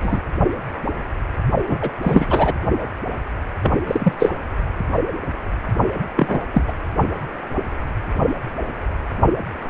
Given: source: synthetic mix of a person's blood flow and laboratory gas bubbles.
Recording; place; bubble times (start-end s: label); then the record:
Doppler ultrasound of blood flow; precordium
0.01-0.21 s: bubbles
1.69-1.79 s: bubbles
1.81-1.90 s: bubbles
2.02-2.54 s: bubbles
3.62-3.72 s: bubbles
3.87-4.13 s: bubbles
4.19-4.32 s: bubbles
6.16-6.41 s: bubbles
6.51-6.62 s: bubbles
6.67-6.73 s: bubbles
From the record:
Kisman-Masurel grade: 233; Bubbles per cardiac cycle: several, 3 to 8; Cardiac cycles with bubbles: 50 to 99%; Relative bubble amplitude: loud (0.450 to 0.775); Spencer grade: 3 (all of the cardiac periods contain showers or single bubble signals, but not dominating or overriding the cardiac motion signals); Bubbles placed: only in the low amplitude regions of the cardiac cycle